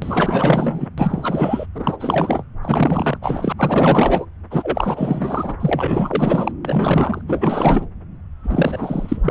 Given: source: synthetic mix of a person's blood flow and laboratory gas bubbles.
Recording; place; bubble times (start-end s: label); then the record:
Doppler ultrasound of blood flow; subclavian vein
0.02-0.88 s: bubbles
0.97-1.66 s: bubbles
1.75-2.44 s: bubbles
2.62-3.18 s: bubbles
3.22-3.52 s: bubbles
3.57-4.25 s: bubbles
4.50-5.55 s: bubbles
5.60-6.51 s: bubbles
6.65-7.21 s: bubbles
7.27-7.87 s: bubbles
8.42-9.31 s: bubbles
From the record:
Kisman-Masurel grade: 444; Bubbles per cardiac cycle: continuous sound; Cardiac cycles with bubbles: 100%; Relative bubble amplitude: maximal (0.775 to 0.999); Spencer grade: 4 (maximum detectable bubble signal sounding continuously throughout systole and diastole of every cardiac period, and overriding the amplitude of the normal cardiac signals); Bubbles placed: anywhere in the cardiac cycle